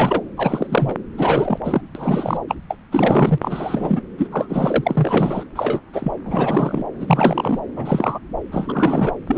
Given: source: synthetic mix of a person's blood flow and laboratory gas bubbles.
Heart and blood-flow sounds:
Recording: Doppler ultrasound of blood flow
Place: subclavian vein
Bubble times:
0.00-0.23 s: bubbles
0.36-0.97 s: bubbles
1.17-1.60 s: bubbles
1.64-1.82 s: bubbles
1.95-2.39 s: bubbles
2.48-2.55 s: bubbles
2.70-2.78 s: bubbles
2.92-3.38 s: bubbles
3.42-4.01 s: bubbles
4.17-4.27 s: bubbles
4.31-5.43 s: bubbles
5.55-5.80 s: bubbles
5.93-6.12 s: bubbles
6.25-6.85 s: bubbles
7.00-7.60 s: bubbles
7.76-8.19 s: bubbles
8.50-9.15 s: bubbles
9.27-9.38 s: bubbles
From the record:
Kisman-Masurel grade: 343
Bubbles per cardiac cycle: rolling drumbeat, 9 or more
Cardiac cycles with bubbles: 100%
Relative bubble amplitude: loud (0.450 to 0.775)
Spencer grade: 3 (all of the cardiac periods contain showers or single bubble signals, but not dominating or overriding the cardiac motion signals)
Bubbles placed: anywhere in the cardiac cycle

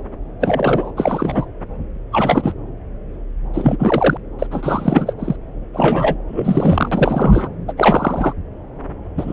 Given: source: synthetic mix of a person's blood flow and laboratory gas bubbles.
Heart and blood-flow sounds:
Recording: Doppler ultrasound of blood flow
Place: subclavian vein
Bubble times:
0.41-0.91 s: bubbles
0.96-1.45 s: bubbles
2.12-2.52 s: bubbles
3.53-4.17 s: bubbles
4.39-4.47 s: bubbles
4.51-5.14 s: bubbles
5.19-5.36 s: bubbles
5.73-6.16 s: bubbles
6.28-6.89 s: bubbles
6.92-7.48 s: bubbles
7.67-7.73 s: bubbles
7.77-8.33 s: bubbles
9.17-9.33 s: bubbles
From the record:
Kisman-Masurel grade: 333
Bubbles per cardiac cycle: rolling drumbeat, 9 or more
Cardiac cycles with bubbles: 50 to 99%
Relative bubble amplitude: loud (0.450 to 0.775)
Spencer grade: 3 (all of the cardiac periods contain showers or single bubble signals, but not dominating or overriding the cardiac motion signals)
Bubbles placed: anywhere in the cardiac cycle

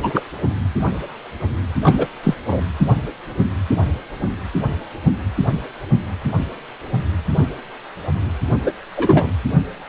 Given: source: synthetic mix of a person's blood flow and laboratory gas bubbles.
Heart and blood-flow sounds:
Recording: Doppler ultrasound of blood flow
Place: precordium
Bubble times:
0.02-0.11 s: bubbles
0.14-0.21 s: bubbles
1.82-2.07 s: bubbles
2.23-2.35 s: bubbles
2.47-2.63 s: bubbles
8.63-8.72 s: bubbles
8.96-9.30 s: bubbles
From the record:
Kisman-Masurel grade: 223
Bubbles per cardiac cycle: several, 3 to 8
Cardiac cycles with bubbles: 10 to 50%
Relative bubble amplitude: loud (0.450 to 0.775)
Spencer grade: 2 (many but less than half of the cardiac periods contain bubble signals, singularly or in groups)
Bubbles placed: only in the low amplitude regions of the cardiac cycle

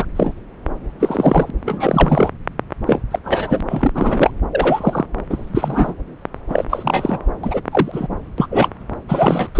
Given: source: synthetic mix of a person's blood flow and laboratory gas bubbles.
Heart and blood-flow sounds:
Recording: Doppler ultrasound of blood flow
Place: subclavian vein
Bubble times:
0.00-0.05 s: bubbles
0.16-0.33 s: bubbles
1.00-1.51 s: bubbles
1.66-2.30 s: bubbles
2.86-2.99 s: bubbles
3.10-3.19 s: bubbles
3.24-3.60 s: bubbles
3.69-4.30 s: bubbles
4.52-5.05 s: bubbles
5.29-5.95 s: bubbles
6.49-6.64 s: bubbles
6.70-7.19 s: bubbles
7.43-7.61 s: bubbles
7.71-8.07 s: bubbles
8.38-8.47 s: bubbles
8.51-8.69 s: bubbles
9.08-9.49 s: bubbles
9.55-9.60 s: bubbles
From the record:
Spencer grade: 3 (all of the cardiac periods contain showers or single bubble signals, but not dominating or overriding the cardiac motion signals)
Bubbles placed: anywhere in the cardiac cycle

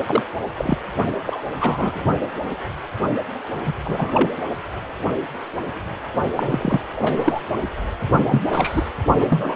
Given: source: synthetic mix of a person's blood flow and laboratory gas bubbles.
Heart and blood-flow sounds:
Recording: Doppler ultrasound of blood flow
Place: precordium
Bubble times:
0.05-0.23 s: bubbles
0.56-0.78 s: bubbles
1.26-1.42 s: bubbles
1.60-2.05 s: bubbles
3.66-3.73 s: bubbles
3.84-4.29 s: bubbles
6.36-6.80 s: bubbles
6.95-7.42 s: bubbles
8.25-8.40 s: bubbles
8.50-8.89 s: bubbles
9.19-9.56 s: bubbles
From the record:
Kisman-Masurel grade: 233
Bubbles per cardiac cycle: several, 3 to 8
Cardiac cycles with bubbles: 50 to 99%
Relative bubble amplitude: loud (0.450 to 0.775)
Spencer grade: 3 (all of the cardiac periods contain showers or single bubble signals, but not dominating or overriding the cardiac motion signals)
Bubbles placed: only in the low amplitude regions of the cardiac cycle

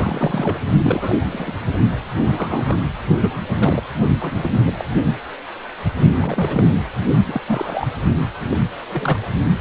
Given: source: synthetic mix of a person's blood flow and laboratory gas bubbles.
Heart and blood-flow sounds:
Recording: Doppler ultrasound of blood flow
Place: precordium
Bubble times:
0.00-0.60 s: bubbles
0.82-1.18 s: bubbles
1.30-1.53 s: bubbles
2.27-2.81 s: bubbles
3.22-3.28 s: bubbles
3.58-3.82 s: bubbles
4.19-4.50 s: bubbles
4.65-4.73 s: bubbles
4.77-4.85 s: bubbles
6.17-6.64 s: bubbles
7.25-7.41 s: bubbles
7.47-8.00 s: bubbles
8.51-8.57 s: bubbles
8.91-9.25 s: bubbles
From the record:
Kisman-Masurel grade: 232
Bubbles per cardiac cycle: several, 3 to 8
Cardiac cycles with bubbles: 50 to 99%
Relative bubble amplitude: moderate (0.250 to 0.450)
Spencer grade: 3 (all of the cardiac periods contain showers or single bubble signals, but not dominating or overriding the cardiac motion signals)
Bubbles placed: only in the low amplitude regions of the cardiac cycle

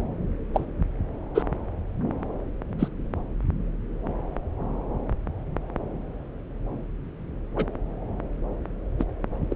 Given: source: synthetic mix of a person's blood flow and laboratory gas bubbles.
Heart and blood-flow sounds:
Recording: Doppler ultrasound of blood flow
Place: subclavian vein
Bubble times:
0.54-0.65 s: bubbles
1.34-1.42 s: bubbles
2.79-2.88 s: bubbles
7.56-7.64 s: bubbles
8.99-9.04 s: bubbles
9.49-9.56 s: bubbles
From the record:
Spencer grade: 2 (many but less than half of the cardiac periods contain bubble signals, singularly or in groups)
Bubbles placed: anywhere in the cardiac cycle

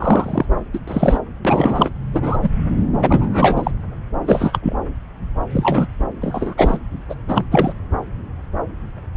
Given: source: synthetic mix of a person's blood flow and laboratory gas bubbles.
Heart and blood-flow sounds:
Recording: Doppler ultrasound of blood flow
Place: subclavian vein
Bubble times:
0.00-0.46 s: bubbles
0.73-0.80 s: bubbles
0.88-1.19 s: bubbles
1.44-1.90 s: bubbles
2.13-2.38 s: bubbles
2.42-2.50 s: bubbles
3.02-3.71 s: bubbles
4.26-4.58 s: bubbles
4.62-4.76 s: bubbles
5.50-5.87 s: bubbles
6.21-6.54 s: bubbles
6.57-6.78 s: bubbles
7.09-7.15 s: bubbles
7.26-7.44 s: bubbles
7.51-7.74 s: bubbles
From the record:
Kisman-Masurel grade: 233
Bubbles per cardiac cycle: several, 3 to 8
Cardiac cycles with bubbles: 50 to 99%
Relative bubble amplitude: loud (0.450 to 0.775)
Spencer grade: 3 (all of the cardiac periods contain showers or single bubble signals, but not dominating or overriding the cardiac motion signals)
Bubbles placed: anywhere in the cardiac cycle

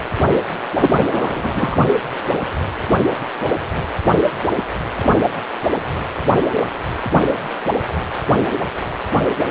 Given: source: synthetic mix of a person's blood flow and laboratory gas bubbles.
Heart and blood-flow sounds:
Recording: Doppler ultrasound of blood flow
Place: precordium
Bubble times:
0.78-0.91 s: bubbles
1.10-1.77 s: bubbles
From the record:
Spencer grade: 1 (occasional bubble signal discernible with the cardiac motion signal, with majority of cardiac periods free of bubbles)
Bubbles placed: anywhere in the cardiac cycle

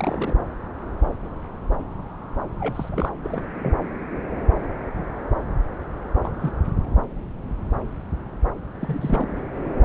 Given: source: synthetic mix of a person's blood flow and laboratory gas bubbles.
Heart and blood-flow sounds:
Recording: Doppler ultrasound of blood flow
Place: subclavian vein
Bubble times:
0.00-0.36 s: bubbles
2.60-3.09 s: bubbles
3.24-3.74 s: bubbles
6.24-6.51 s: bubbles
8.81-9.29 s: bubbles
From the record:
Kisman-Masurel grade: 221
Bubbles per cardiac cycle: several, 3 to 8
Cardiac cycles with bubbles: 10 to 50%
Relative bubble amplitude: barely perceptible (0.100 to 0.250)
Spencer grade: 2 (many but less than half of the cardiac periods contain bubble signals, singularly or in groups)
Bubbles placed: anywhere in the cardiac cycle

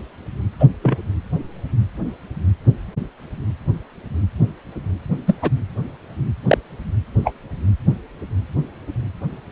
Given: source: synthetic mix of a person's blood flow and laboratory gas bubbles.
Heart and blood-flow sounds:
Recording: Doppler ultrasound of blood flow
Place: precordium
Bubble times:
0.59-0.67 s: bubbles
0.82-0.98 s: bubbles
5.26-5.35 s: bubbles
5.42-5.50 s: bubbles
6.47-6.57 s: bubbles
7.24-7.33 s: bubbles
From the record:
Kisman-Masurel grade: 123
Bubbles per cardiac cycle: 1 to 2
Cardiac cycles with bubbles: 10 to 50%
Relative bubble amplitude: loud (0.450 to 0.775)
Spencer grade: 2 (many but less than half of the cardiac periods contain bubble signals, singularly or in groups)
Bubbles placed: anywhere in the cardiac cycle

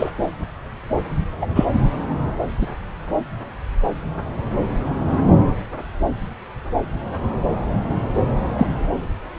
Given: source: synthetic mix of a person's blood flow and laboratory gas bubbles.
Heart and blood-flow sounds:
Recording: Doppler ultrasound of blood flow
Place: subclavian vein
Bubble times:
0.00-0.10 s: bubbles
1.41-1.46 s: bubbles
1.55-1.66 s: bubbles
2.61-2.67 s: bubbles
8.58-8.67 s: bubbles
From the record:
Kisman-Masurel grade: 123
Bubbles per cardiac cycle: 1 to 2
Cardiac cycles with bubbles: 10 to 50%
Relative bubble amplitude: loud (0.450 to 0.775)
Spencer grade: 2 (many but less than half of the cardiac periods contain bubble signals, singularly or in groups)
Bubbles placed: anywhere in the cardiac cycle

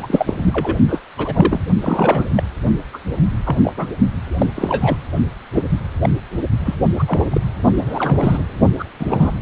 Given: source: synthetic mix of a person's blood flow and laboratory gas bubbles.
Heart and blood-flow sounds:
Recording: Doppler ultrasound of blood flow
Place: precordium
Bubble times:
0.02-0.76 s: bubbles
0.88-1.01 s: bubbles
1.18-1.66 s: bubbles
1.81-2.26 s: bubbles
2.36-2.44 s: bubbles
2.93-2.98 s: bubbles
3.45-3.57 s: bubbles
3.62-3.73 s: bubbles
3.77-3.87 s: bubbles
4.38-4.46 s: bubbles
4.54-4.97 s: bubbles
5.51-5.63 s: bubbles
6.01-6.09 s: bubbles
6.65-6.75 s: bubbles
6.95-7.04 s: bubbles
7.07-7.29 s: bubbles
7.31-7.41 s: bubbles
7.75-8.43 s: bubbles
8.78-8.84 s: bubbles
8.99-9.31 s: bubbles
From the record:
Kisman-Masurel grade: 242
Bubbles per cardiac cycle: several, 3 to 8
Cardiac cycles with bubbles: 100%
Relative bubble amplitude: moderate (0.250 to 0.450)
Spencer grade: 3 (all of the cardiac periods contain showers or single bubble signals, but not dominating or overriding the cardiac motion signals)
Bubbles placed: only in the low amplitude regions of the cardiac cycle

